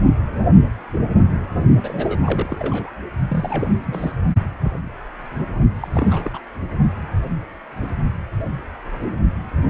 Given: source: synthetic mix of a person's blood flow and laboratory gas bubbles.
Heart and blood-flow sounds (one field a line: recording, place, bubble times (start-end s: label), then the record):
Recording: Doppler ultrasound of blood flow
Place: precordium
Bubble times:
1.82-2.90 s: bubbles
3.29-3.69 s: bubbles
3.85-4.12 s: bubbles
5.80-5.88 s: bubbles
5.93-6.31 s: bubbles
6.33-6.41 s: bubbles
From the record:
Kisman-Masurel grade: 221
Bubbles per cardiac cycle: several, 3 to 8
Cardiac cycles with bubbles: 10 to 50%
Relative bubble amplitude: barely perceptible (0.100 to 0.250)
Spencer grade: 2 (many but less than half of the cardiac periods contain bubble signals, singularly or in groups)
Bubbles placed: only in the low amplitude regions of the cardiac cycle